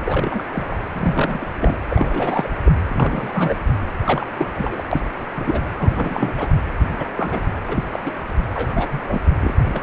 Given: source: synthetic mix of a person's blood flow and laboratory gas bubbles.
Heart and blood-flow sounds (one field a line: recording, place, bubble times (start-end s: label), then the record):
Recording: Doppler ultrasound of blood flow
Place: precordium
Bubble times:
0.05-0.42 s: bubbles
0.53-0.80 s: bubbles
0.93-1.47 s: bubbles
1.60-1.77 s: bubbles
1.89-2.51 s: bubbles
2.65-2.71 s: bubbles
2.88-3.54 s: bubbles
4.04-4.26 s: bubbles
4.37-4.50 s: bubbles
4.55-4.82 s: bubbles
4.91-5.01 s: bubbles
5.33-5.62 s: bubbles
5.79-6.47 s: bubbles
6.98-7.09 s: bubbles
7.16-7.41 s: bubbles
7.67-7.83 s: bubbles
7.90-7.99 s: bubbles
8.05-8.12 s: bubbles
8.54-9.20 s: bubbles
9.41-9.51 s: bubbles
9.73-9.83 s: bubbles
From the record:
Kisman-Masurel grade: 242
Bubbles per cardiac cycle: several, 3 to 8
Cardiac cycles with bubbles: 100%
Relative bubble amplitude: moderate (0.250 to 0.450)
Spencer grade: 3 (all of the cardiac periods contain showers or single bubble signals, but not dominating or overriding the cardiac motion signals)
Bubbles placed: anywhere in the cardiac cycle